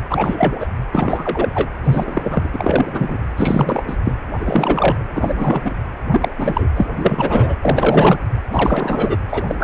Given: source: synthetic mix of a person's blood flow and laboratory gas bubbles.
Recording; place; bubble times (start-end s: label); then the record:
Doppler ultrasound of blood flow; precordium
0.09-0.67 s: bubbles
0.92-1.69 s: bubbles
1.84-2.48 s: bubbles
2.54-3.18 s: bubbles
3.36-3.83 s: bubbles
3.87-3.96 s: bubbles
4.04-4.13 s: bubbles
4.38-5.04 s: bubbles
5.14-5.62 s: bubbles
5.64-5.72 s: bubbles
6.12-6.29 s: bubbles
6.38-6.68 s: bubbles
6.75-6.87 s: bubbles
6.95-7.56 s: bubbles
7.62-8.18 s: bubbles
8.50-9.18 s: bubbles
9.29-9.42 s: bubbles
9.47-9.55 s: bubbles
9.59-9.64 s: bubbles
From the record:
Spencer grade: 3 (all of the cardiac periods contain showers or single bubble signals, but not dominating or overriding the cardiac motion signals); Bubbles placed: anywhere in the cardiac cycle